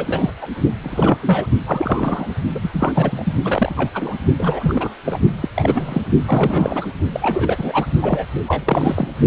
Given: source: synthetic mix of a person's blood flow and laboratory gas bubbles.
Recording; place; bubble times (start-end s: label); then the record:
Doppler ultrasound of blood flow; precordium
0.00-0.30 s: bubbles
0.41-0.47 s: bubbles
0.82-1.46 s: bubbles
1.67-2.27 s: bubbles
2.54-2.59 s: bubbles
2.61-3.33 s: bubbles
3.42-3.89 s: bubbles
3.94-4.18 s: bubbles
4.39-4.95 s: bubbles
5.05-5.19 s: bubbles
5.40-5.49 s: bubbles
5.56-6.02 s: bubbles
6.27-6.88 s: bubbles
7.12-7.86 s: bubbles
8.01-8.26 s: bubbles
8.47-9.08 s: bubbles
From the record:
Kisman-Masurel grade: 342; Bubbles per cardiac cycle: rolling drumbeat, 9 or more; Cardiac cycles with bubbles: 100%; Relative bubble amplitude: moderate (0.250 to 0.450); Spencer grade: 3 (all of the cardiac periods contain showers or single bubble signals, but not dominating or overriding the cardiac motion signals); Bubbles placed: only in the low amplitude regions of the cardiac cycle